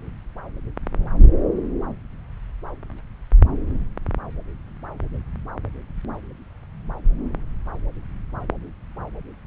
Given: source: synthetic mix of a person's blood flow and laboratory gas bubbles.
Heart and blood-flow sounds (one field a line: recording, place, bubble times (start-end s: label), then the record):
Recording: Doppler ultrasound of blood flow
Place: subclavian vein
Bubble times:
no bubbles
From the record:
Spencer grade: 0 (complete lack of bubble signals)